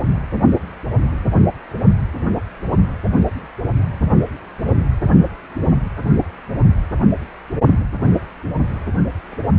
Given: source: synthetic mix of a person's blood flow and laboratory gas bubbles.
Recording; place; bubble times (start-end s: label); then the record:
Doppler ultrasound of blood flow; precordium
no bubbles
From the record:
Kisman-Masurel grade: 000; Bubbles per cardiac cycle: 0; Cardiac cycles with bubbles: 0%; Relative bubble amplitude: no bubbles discernible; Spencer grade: 0 (complete lack of bubble signals)